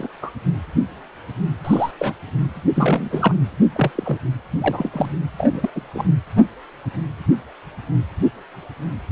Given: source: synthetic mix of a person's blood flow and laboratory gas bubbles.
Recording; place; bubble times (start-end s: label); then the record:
Doppler ultrasound of blood flow; precordium
0.00-0.09 s: bubbles
0.22-0.31 s: bubbles
1.65-1.91 s: bubbles
1.97-2.13 s: bubbles
2.75-3.35 s: bubbles
3.75-3.91 s: bubbles
3.95-4.18 s: bubbles
4.58-4.90 s: bubbles
4.93-5.11 s: bubbles
5.38-5.70 s: bubbles
5.75-5.81 s: bubbles
5.94-6.08 s: bubbles
From the record:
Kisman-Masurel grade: 232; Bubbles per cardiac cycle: several, 3 to 8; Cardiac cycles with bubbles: 50 to 99%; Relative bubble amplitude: moderate (0.250 to 0.450); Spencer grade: 3 (all of the cardiac periods contain showers or single bubble signals, but not dominating or overriding the cardiac motion signals); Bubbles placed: anywhere in the cardiac cycle